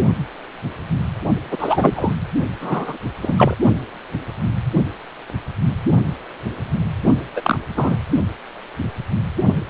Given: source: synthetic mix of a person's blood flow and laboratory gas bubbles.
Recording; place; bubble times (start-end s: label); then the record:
Doppler ultrasound of blood flow; precordium
1.51-2.15 s: bubbles
2.60-2.98 s: bubbles
3.22-3.56 s: bubbles
7.36-7.57 s: bubbles
7.76-7.98 s: bubbles
From the record:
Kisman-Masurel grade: 223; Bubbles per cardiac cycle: several, 3 to 8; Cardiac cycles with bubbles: 10 to 50%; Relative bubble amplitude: loud (0.450 to 0.775); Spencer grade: 2 (many but less than half of the cardiac periods contain bubble signals, singularly or in groups); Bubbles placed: only in the low amplitude regions of the cardiac cycle